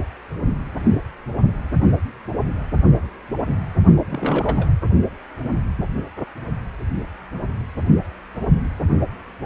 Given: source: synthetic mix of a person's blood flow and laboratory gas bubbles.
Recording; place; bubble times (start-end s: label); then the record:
Doppler ultrasound of blood flow; precordium
4.09-4.68 s: bubbles
From the record:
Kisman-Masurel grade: 211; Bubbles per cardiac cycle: several, 3 to 8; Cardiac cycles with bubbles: 1 to 10%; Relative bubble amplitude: barely perceptible (0.100 to 0.250); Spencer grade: 1 (occasional bubble signal discernible with the cardiac motion signal, with majority of cardiac periods free of bubbles); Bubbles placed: anywhere in the cardiac cycle